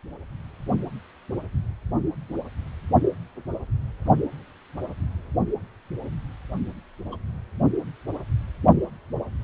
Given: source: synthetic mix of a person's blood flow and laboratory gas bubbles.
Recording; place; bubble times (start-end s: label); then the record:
Doppler ultrasound of blood flow; precordium
7.12-7.16 s: bubbles
From the record:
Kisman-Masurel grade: 111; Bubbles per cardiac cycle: 1 to 2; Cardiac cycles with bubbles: 1 to 10%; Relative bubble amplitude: barely perceptible (0.100 to 0.250); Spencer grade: 1 (occasional bubble signal discernible with the cardiac motion signal, with majority of cardiac periods free of bubbles); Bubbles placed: only in the low amplitude regions of the cardiac cycle